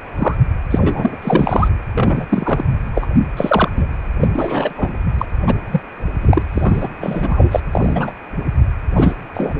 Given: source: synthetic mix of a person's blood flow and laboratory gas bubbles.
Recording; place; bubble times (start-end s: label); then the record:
Doppler ultrasound of blood flow; precordium
0.17-0.35 s: bubbles
0.71-1.18 s: bubbles
1.22-1.68 s: bubbles
1.95-2.25 s: bubbles
2.29-2.70 s: bubbles
2.95-3.07 s: bubbles
3.36-3.69 s: bubbles
3.76-3.86 s: bubbles
4.20-4.28 s: bubbles
4.33-5.06 s: bubbles
5.17-5.25 s: bubbles
5.46-5.55 s: bubbles
5.71-5.81 s: bubbles
6.21-6.42 s: bubbles
6.53-6.90 s: bubbles
7.00-7.60 s: bubbles
7.71-8.12 s: bubbles
8.96-9.13 s: bubbles
9.33-9.54 s: bubbles
9.58-9.60 s: bubbles
From the record:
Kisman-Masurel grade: 243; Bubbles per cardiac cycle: several, 3 to 8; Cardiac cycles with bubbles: 100%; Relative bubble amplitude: loud (0.450 to 0.775); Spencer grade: 3 (all of the cardiac periods contain showers or single bubble signals, but not dominating or overriding the cardiac motion signals); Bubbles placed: anywhere in the cardiac cycle